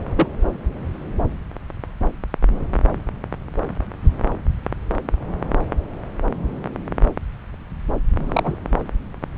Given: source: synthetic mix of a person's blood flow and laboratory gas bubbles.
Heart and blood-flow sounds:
Doppler ultrasound of blood flow; subclavian vein
0.16-0.28 s: bubbles
8.26-8.58 s: bubbles
From the record:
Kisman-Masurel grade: 113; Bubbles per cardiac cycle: 1 to 2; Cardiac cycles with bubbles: 1 to 10%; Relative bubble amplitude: loud (0.450 to 0.775); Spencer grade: 1 (occasional bubble signal discernible with the cardiac motion signal, with majority of cardiac periods free of bubbles); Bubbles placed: anywhere in the cardiac cycle

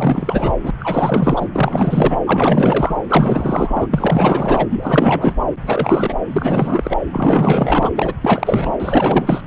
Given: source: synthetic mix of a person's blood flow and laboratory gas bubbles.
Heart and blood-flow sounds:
Doppler ultrasound of blood flow; subclavian vein
0.00-0.56 s: bubbles
0.63-0.71 s: bubbles
0.80-1.48 s: bubbles
1.53-2.19 s: bubbles
2.25-2.96 s: bubbles
3.09-3.87 s: bubbles
3.91-4.67 s: bubbles
4.70-5.34 s: bubbles
5.59-6.15 s: bubbles
6.29-6.98 s: bubbles
7.12-7.91 s: bubbles
7.96-8.14 s: bubbles
8.21-8.72 s: bubbles
8.79-9.43 s: bubbles
From the record:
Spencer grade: 4 (maximum detectable bubble signal sounding continuously throughout systole and diastole of every cardiac period, and overriding the amplitude of the normal cardiac signals); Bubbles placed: anywhere in the cardiac cycle

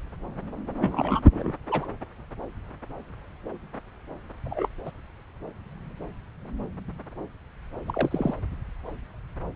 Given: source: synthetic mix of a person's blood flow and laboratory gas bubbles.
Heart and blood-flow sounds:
Doppler ultrasound of blood flow; subclavian vein
0.79-1.21 s: bubbles
1.34-1.53 s: bubbles
1.69-1.85 s: bubbles
4.44-4.69 s: bubbles
4.86-4.91 s: bubbles
7.87-8.34 s: bubbles
From the record:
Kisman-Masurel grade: 221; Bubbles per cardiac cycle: several, 3 to 8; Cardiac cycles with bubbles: 10 to 50%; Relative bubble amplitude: barely perceptible (0.100 to 0.250); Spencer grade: 2 (many but less than half of the cardiac periods contain bubble signals, singularly or in groups); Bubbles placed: anywhere in the cardiac cycle

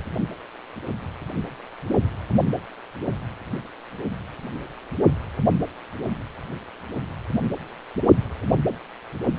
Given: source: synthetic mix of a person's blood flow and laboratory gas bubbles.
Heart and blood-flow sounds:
Doppler ultrasound of blood flow; precordium
no bubbles
From the record:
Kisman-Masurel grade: 000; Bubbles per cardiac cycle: 0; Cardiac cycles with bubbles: 0%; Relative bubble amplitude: no bubbles discernible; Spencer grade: 0 (complete lack of bubble signals)

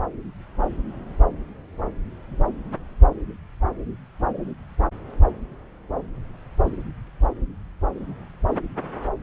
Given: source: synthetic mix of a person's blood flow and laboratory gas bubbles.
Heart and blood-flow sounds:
Doppler ultrasound of blood flow; subclavian vein
no bubbles
From the record:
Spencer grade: 0 (complete lack of bubble signals)

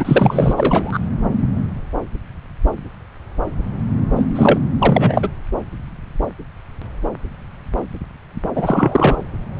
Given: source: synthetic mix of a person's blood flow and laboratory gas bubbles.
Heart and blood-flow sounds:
Doppler ultrasound of blood flow; subclavian vein
0.00-0.54 s: bubbles
0.56-0.99 s: bubbles
4.16-4.26 s: bubbles
4.36-4.58 s: bubbles
4.79-5.29 s: bubbles
8.55-9.16 s: bubbles
From the record:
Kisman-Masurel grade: 223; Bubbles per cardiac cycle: several, 3 to 8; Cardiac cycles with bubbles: 10 to 50%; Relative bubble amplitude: loud (0.450 to 0.775); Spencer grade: 2 (many but less than half of the cardiac periods contain bubble signals, singularly or in groups); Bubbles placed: anywhere in the cardiac cycle

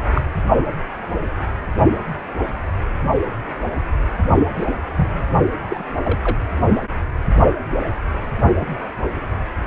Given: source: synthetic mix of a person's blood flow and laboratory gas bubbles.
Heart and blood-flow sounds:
Doppler ultrasound of blood flow; precordium
0.14-0.22 s: bubbles
4.58-4.66 s: bubbles
4.96-5.22 s: bubbles
5.70-5.85 s: bubbles
6.04-6.46 s: bubbles
From the record:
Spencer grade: 2 (many but less than half of the cardiac periods contain bubble signals, singularly or in groups); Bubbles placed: only in the low amplitude regions of the cardiac cycle

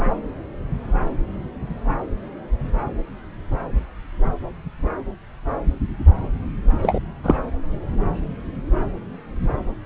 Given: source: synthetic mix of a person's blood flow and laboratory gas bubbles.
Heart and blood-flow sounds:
Doppler ultrasound of blood flow; subclavian vein
6.82-6.99 s: bubbles
7.23-7.36 s: bubbles
From the record:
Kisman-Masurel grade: 113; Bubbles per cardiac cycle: 1 to 2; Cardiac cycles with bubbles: 1 to 10%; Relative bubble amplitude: loud (0.450 to 0.775); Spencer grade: 1 (occasional bubble signal discernible with the cardiac motion signal, with majority of cardiac periods free of bubbles); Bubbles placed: anywhere in the cardiac cycle

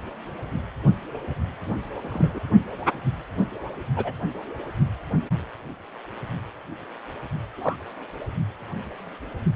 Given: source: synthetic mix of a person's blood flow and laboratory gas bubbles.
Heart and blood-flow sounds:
Doppler ultrasound of blood flow; precordium
2.02-2.40 s: bubbles
3.96-4.12 s: bubbles
7.57-7.76 s: bubbles
From the record:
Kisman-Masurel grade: 122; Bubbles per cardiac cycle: 1 to 2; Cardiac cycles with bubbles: 10 to 50%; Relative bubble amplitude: moderate (0.250 to 0.450); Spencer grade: 2 (many but less than half of the cardiac periods contain bubble signals, singularly or in groups); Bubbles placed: only in the low amplitude regions of the cardiac cycle

